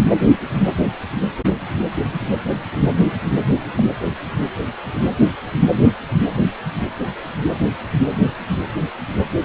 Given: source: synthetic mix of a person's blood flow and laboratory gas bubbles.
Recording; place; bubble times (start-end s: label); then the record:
Doppler ultrasound of blood flow; precordium
0.64-0.75 s: bubbles
3.76-3.83 s: bubbles
From the record:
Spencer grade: 2 (many but less than half of the cardiac periods contain bubble signals, singularly or in groups); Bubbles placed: only in the low amplitude regions of the cardiac cycle